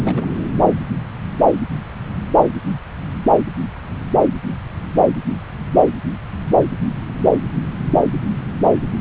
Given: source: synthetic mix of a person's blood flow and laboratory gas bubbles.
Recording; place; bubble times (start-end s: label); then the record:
Doppler ultrasound of blood flow; subclavian vein
0.04-0.26 s: bubbles
From the record:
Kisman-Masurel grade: 111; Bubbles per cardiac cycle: 1 to 2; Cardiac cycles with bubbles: 1 to 10%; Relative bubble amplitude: barely perceptible (0.100 to 0.250); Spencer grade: 1 (occasional bubble signal discernible with the cardiac motion signal, with majority of cardiac periods free of bubbles); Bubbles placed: anywhere in the cardiac cycle